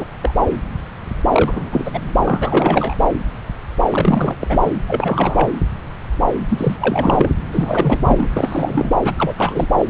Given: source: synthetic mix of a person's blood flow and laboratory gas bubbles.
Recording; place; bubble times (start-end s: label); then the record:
Doppler ultrasound of blood flow; subclavian vein
0.00-0.06 s: bubbles
0.22-0.34 s: bubbles
1.32-2.01 s: bubbles
2.25-2.95 s: bubbles
3.01-3.08 s: bubbles
3.91-4.36 s: bubbles
4.40-4.58 s: bubbles
4.63-4.75 s: bubbles
4.88-5.50 s: bubbles
6.50-6.77 s: bubbles
6.80-7.29 s: bubbles
7.52-8.28 s: bubbles
8.36-8.95 s: bubbles
9.04-9.12 s: bubbles
9.17-9.34 s: bubbles
9.38-9.67 s: bubbles
9.79-9.86 s: bubbles
From the record:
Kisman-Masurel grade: 333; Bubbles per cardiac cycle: rolling drumbeat, 9 or more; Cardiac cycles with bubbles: 50 to 99%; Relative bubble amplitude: loud (0.450 to 0.775); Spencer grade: 3 (all of the cardiac periods contain showers or single bubble signals, but not dominating or overriding the cardiac motion signals); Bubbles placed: anywhere in the cardiac cycle